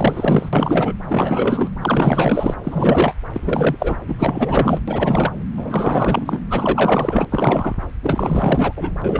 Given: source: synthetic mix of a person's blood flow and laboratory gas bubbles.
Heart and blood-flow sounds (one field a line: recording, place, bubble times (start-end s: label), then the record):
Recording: Doppler ultrasound of blood flow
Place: subclavian vein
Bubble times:
0.00-0.49 s: bubbles
0.53-0.93 s: bubbles
1.07-1.70 s: bubbles
1.81-2.54 s: bubbles
2.63-3.15 s: bubbles
3.33-3.76 s: bubbles
3.79-3.98 s: bubbles
4.08-4.81 s: bubbles
4.88-5.31 s: bubbles
5.57-6.41 s: bubbles
6.50-7.25 s: bubbles
7.29-7.74 s: bubbles
8.03-8.73 s: bubbles
8.76-8.93 s: bubbles
9.01-9.20 s: bubbles
From the record:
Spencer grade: 4 (maximum detectable bubble signal sounding continuously throughout systole and diastole of every cardiac period, and overriding the amplitude of the normal cardiac signals)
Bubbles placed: anywhere in the cardiac cycle